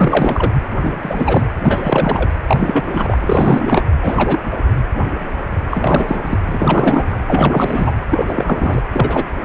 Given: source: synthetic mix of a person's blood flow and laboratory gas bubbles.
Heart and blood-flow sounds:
Doppler ultrasound of blood flow; precordium
0.00-0.52 s: bubbles
0.83-1.48 s: bubbles
1.63-2.29 s: bubbles
2.48-3.18 s: bubbles
3.21-3.85 s: bubbles
4.01-4.39 s: bubbles
4.45-4.51 s: bubbles
5.71-6.38 s: bubbles
6.52-7.19 s: bubbles
7.26-7.91 s: bubbles
8.11-8.81 s: bubbles
8.92-9.28 s: bubbles
9.41-9.45 s: bubbles
From the record:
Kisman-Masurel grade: 333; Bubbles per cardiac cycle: rolling drumbeat, 9 or more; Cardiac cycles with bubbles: 50 to 99%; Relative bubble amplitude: loud (0.450 to 0.775); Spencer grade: 3 (all of the cardiac periods contain showers or single bubble signals, but not dominating or overriding the cardiac motion signals); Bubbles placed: anywhere in the cardiac cycle

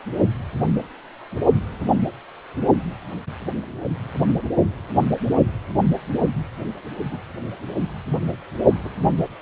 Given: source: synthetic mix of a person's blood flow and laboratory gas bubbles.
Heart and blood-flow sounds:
Doppler ultrasound of blood flow; precordium
7.10-7.18 s: bubbles
8.84-8.90 s: bubbles
From the record:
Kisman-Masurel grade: 121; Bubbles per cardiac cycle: 1 to 2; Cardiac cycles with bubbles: 10 to 50%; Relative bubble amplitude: barely perceptible (0.100 to 0.250); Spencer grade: 2 (many but less than half of the cardiac periods contain bubble signals, singularly or in groups); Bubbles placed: only in the low amplitude regions of the cardiac cycle

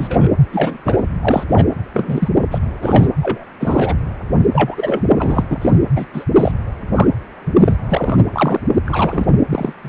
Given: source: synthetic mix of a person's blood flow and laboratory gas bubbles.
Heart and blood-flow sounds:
Doppler ultrasound of blood flow; precordium
0.00-0.28 s: bubbles
0.52-0.78 s: bubbles
0.85-1.03 s: bubbles
1.22-1.44 s: bubbles
1.49-1.66 s: bubbles
1.94-2.29 s: bubbles
2.51-2.59 s: bubbles
2.82-3.07 s: bubbles
3.22-3.44 s: bubbles
3.60-3.96 s: bubbles
4.54-5.04 s: bubbles
5.17-5.45 s: bubbles
5.50-5.58 s: bubbles
5.61-5.71 s: bubbles
5.96-6.06 s: bubbles
6.13-6.25 s: bubbles
6.38-6.52 s: bubbles
6.95-7.08 s: bubbles
7.58-7.77 s: bubbles
7.91-8.24 s: bubbles
8.33-8.60 s: bubbles
8.86-9.26 s: bubbles
9.49-9.73 s: bubbles
9.83-9.89 s: bubbles
From the record:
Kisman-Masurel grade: 233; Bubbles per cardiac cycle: several, 3 to 8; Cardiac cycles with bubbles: 50 to 99%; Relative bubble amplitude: loud (0.450 to 0.775); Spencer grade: 3 (all of the cardiac periods contain showers or single bubble signals, but not dominating or overriding the cardiac motion signals); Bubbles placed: anywhere in the cardiac cycle

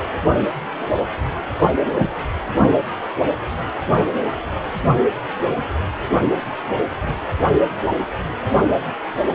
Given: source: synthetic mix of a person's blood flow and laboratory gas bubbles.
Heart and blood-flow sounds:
Doppler ultrasound of blood flow; precordium
1.99-2.08 s: bubbles
From the record:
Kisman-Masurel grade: 113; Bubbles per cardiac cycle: 1 to 2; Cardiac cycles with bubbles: 1 to 10%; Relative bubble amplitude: loud (0.450 to 0.775); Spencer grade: 1 (occasional bubble signal discernible with the cardiac motion signal, with majority of cardiac periods free of bubbles); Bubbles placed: anywhere in the cardiac cycle

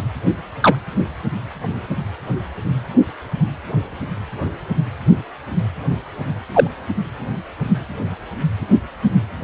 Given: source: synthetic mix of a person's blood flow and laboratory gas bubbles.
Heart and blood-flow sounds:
Doppler ultrasound of blood flow; precordium
0.60-0.75 s: bubbles
6.54-6.67 s: bubbles
From the record:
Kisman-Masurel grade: 123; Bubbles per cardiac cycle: 1 to 2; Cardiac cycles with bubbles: 10 to 50%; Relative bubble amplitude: loud (0.450 to 0.775); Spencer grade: 2 (many but less than half of the cardiac periods contain bubble signals, singularly or in groups); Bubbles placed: anywhere in the cardiac cycle

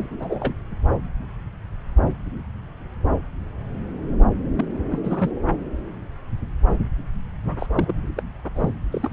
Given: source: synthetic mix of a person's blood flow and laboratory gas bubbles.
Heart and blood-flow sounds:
Doppler ultrasound of blood flow; subclavian vein
0.00-0.55 s: bubbles
4.57-4.66 s: bubbles
4.90-4.99 s: bubbles
5.03-5.30 s: bubbles
7.46-7.56 s: bubbles
7.58-7.67 s: bubbles
7.77-7.93 s: bubbles
8.16-8.22 s: bubbles
8.55-8.73 s: bubbles
8.92-9.10 s: bubbles
From the record:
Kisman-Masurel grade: 221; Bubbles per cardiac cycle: several, 3 to 8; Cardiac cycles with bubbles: 10 to 50%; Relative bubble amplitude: barely perceptible (0.100 to 0.250); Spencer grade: 2 (many but less than half of the cardiac periods contain bubble signals, singularly or in groups); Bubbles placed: anywhere in the cardiac cycle

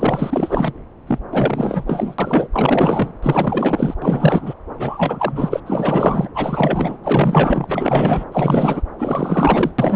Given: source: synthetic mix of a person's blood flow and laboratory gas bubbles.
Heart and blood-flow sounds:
Doppler ultrasound of blood flow; subclavian vein
0.00-0.73 s: bubbles
1.06-1.19 s: bubbles
1.31-1.84 s: bubbles
1.87-2.15 s: bubbles
2.18-2.48 s: bubbles
2.52-3.12 s: bubbles
3.22-3.94 s: bubbles
4.01-4.54 s: bubbles
4.79-5.60 s: bubbles
5.66-6.29 s: bubbles
6.34-6.98 s: bubbles
7.03-8.24 s: bubbles
8.32-8.83 s: bubbles
8.98-9.71 s: bubbles
9.79-9.95 s: bubbles
From the record:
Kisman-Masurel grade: 444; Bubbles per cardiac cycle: continuous sound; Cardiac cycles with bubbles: 100%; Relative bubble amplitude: maximal (0.775 to 0.999); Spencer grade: 4 (maximum detectable bubble signal sounding continuously throughout systole and diastole of every cardiac period, and overriding the amplitude of the normal cardiac signals); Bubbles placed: anywhere in the cardiac cycle

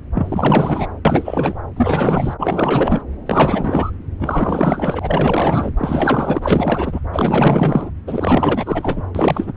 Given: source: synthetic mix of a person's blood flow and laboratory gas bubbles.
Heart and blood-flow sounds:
Doppler ultrasound of blood flow; subclavian vein
0.14-0.87 s: bubbles
1.05-1.58 s: bubbles
1.76-2.34 s: bubbles
2.40-3.02 s: bubbles
3.25-3.91 s: bubbles
4.19-5.73 s: bubbles
5.77-7.00 s: bubbles
7.12-7.91 s: bubbles
8.07-9.02 s: bubbles
9.14-9.53 s: bubbles
From the record:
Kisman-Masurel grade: 444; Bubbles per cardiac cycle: continuous sound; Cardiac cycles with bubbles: 100%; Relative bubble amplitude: maximal (0.775 to 0.999); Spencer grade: 4 (maximum detectable bubble signal sounding continuously throughout systole and diastole of every cardiac period, and overriding the amplitude of the normal cardiac signals); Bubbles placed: anywhere in the cardiac cycle

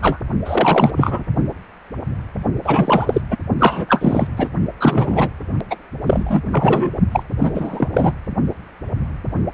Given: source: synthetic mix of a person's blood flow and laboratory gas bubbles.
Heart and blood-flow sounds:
Doppler ultrasound of blood flow; precordium
0.02-0.18 s: bubbles
0.44-0.91 s: bubbles
0.96-1.23 s: bubbles
2.64-3.21 s: bubbles
3.30-3.37 s: bubbles
3.58-3.85 s: bubbles
3.88-4.27 s: bubbles
4.37-4.49 s: bubbles
4.79-5.31 s: bubbles
5.70-5.77 s: bubbles
6.07-6.43 s: bubbles
6.52-6.91 s: bubbles
7.12-7.23 s: bubbles
7.39-7.51 s: bubbles
7.54-7.88 s: bubbles
7.93-8.12 s: bubbles
From the record:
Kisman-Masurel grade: 333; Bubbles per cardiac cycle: rolling drumbeat, 9 or more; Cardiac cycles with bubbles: 50 to 99%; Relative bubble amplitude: loud (0.450 to 0.775); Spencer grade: 3 (all of the cardiac periods contain showers or single bubble signals, but not dominating or overriding the cardiac motion signals); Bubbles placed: only in the low amplitude regions of the cardiac cycle

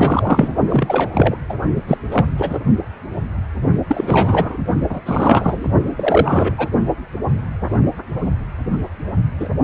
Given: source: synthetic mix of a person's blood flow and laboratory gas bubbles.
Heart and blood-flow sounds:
Doppler ultrasound of blood flow; precordium
0.00-0.55 s: bubbles
0.69-1.10 s: bubbles
1.14-1.36 s: bubbles
1.49-1.54 s: bubbles
1.87-1.98 s: bubbles
2.11-2.26 s: bubbles
2.38-2.60 s: bubbles
3.87-4.57 s: bubbles
4.89-5.01 s: bubbles
5.06-5.71 s: bubbles
5.96-6.55 s: bubbles
6.58-6.69 s: bubbles
9.39-9.48 s: bubbles
From the record:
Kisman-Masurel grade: 333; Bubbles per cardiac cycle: rolling drumbeat, 9 or more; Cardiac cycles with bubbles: 50 to 99%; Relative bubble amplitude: loud (0.450 to 0.775); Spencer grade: 3 (all of the cardiac periods contain showers or single bubble signals, but not dominating or overriding the cardiac motion signals); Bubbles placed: only in the low amplitude regions of the cardiac cycle

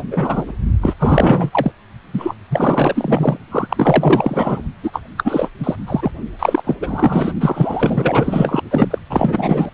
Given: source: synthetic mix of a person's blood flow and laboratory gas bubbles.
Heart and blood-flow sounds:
Doppler ultrasound of blood flow; precordium
0.00-0.02 s: bubbles
0.11-0.52 s: bubbles
0.81-0.94 s: bubbles
0.99-1.72 s: bubbles
2.13-2.34 s: bubbles
2.50-3.37 s: bubbles
3.51-4.62 s: bubbles
4.83-5.03 s: bubbles
5.17-5.49 s: bubbles
5.59-5.75 s: bubbles
5.87-6.11 s: bubbles
6.39-6.75 s: bubbles
6.81-7.33 s: bubbles
7.40-8.61 s: bubbles
8.71-8.98 s: bubbles
9.09-9.70 s: bubbles
From the record:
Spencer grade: 4 (maximum detectable bubble signal sounding continuously throughout systole and diastole of every cardiac period, and overriding the amplitude of the normal cardiac signals); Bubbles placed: only in the low amplitude regions of the cardiac cycle

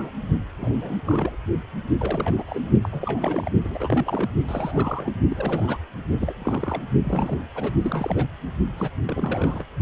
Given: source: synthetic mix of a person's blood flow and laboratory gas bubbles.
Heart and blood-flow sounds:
Doppler ultrasound of blood flow; precordium
0.00-0.11 s: bubbles
0.58-0.98 s: bubbles
1.04-1.36 s: bubbles
1.98-2.44 s: bubbles
2.46-2.70 s: bubbles
2.82-2.89 s: bubbles
2.92-3.50 s: bubbles
3.63-4.28 s: bubbles
4.47-5.13 s: bubbles
5.29-5.78 s: bubbles
6.20-6.33 s: bubbles
6.39-6.83 s: bubbles
7.04-7.39 s: bubbles
7.55-7.73 s: bubbles
7.81-8.27 s: bubbles
8.77-8.90 s: bubbles
9.05-9.63 s: bubbles
From the record:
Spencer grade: 3 (all of the cardiac periods contain showers or single bubble signals, but not dominating or overriding the cardiac motion signals); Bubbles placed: only in the low amplitude regions of the cardiac cycle

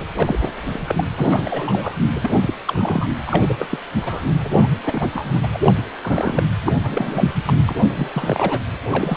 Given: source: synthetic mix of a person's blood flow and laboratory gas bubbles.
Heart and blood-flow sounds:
Doppler ultrasound of blood flow; precordium
0.16-0.51 s: bubbles
0.73-0.82 s: bubbles
0.86-1.04 s: bubbles
1.17-1.96 s: bubbles
2.15-2.19 s: bubbles
2.22-2.30 s: bubbles
2.41-2.53 s: bubbles
2.67-3.07 s: bubbles
3.26-3.56 s: bubbles
3.59-3.68 s: bubbles
3.70-3.79 s: bubbles
4.00-4.23 s: bubbles
4.44-4.49 s: bubbles
4.53-4.68 s: bubbles
4.84-5.40 s: bubbles
5.43-5.48 s: bubbles
5.53-5.59 s: bubbles
5.66-5.72 s: bubbles
5.77-5.82 s: bubbles
6.03-6.50 s: bubbles
6.62-6.73 s: bubbles
6.83-7.35 s: bubbles
7.45-7.54 s: bubbles
7.68-7.75 s: bubbles
7.95-8.09 s: bubbles
8.13-8.59 s: bubbles
8.90-9.17 s: bubbles
From the record:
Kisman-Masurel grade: 332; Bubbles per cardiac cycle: rolling drumbeat, 9 or more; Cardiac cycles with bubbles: 50 to 99%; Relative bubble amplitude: moderate (0.250 to 0.450); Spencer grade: 3 (all of the cardiac periods contain showers or single bubble signals, but not dominating or overriding the cardiac motion signals); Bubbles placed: anywhere in the cardiac cycle

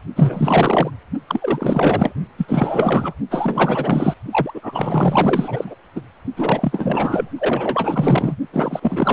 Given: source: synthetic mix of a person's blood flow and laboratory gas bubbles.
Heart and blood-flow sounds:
Doppler ultrasound of blood flow; precordium
0.16-0.91 s: bubbles
1.27-2.12 s: bubbles
2.37-3.15 s: bubbles
3.30-4.14 s: bubbles
4.31-5.75 s: bubbles
5.96-6.02 s: bubbles
6.37-7.29 s: bubbles
7.38-8.37 s: bubbles
8.53-9.13 s: bubbles
From the record:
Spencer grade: 4 (maximum detectable bubble signal sounding continuously throughout systole and diastole of every cardiac period, and overriding the amplitude of the normal cardiac signals); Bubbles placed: only in the low amplitude regions of the cardiac cycle

